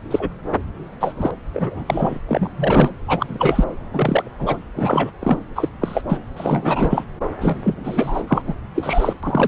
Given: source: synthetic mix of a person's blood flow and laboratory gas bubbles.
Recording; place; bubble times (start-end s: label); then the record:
Doppler ultrasound of blood flow; subclavian vein
0.11-0.29 s: bubbles
0.99-1.15 s: bubbles
1.17-1.31 s: bubbles
1.54-1.83 s: bubbles
1.86-2.19 s: bubbles
2.28-2.48 s: bubbles
2.56-2.90 s: bubbles
3.07-3.64 s: bubbles
3.93-4.31 s: bubbles
4.39-4.58 s: bubbles
4.75-5.11 s: bubbles
5.20-5.40 s: bubbles
5.55-5.69 s: bubbles
5.81-6.01 s: bubbles
6.09-6.18 s: bubbles
6.37-7.04 s: bubbles
7.41-7.58 s: bubbles
7.63-8.23 s: bubbles
8.28-8.42 s: bubbles
8.47-8.54 s: bubbles
8.75-9.13 s: bubbles
9.23-9.48 s: bubbles
From the record:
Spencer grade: 3 (all of the cardiac periods contain showers or single bubble signals, but not dominating or overriding the cardiac motion signals); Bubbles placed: anywhere in the cardiac cycle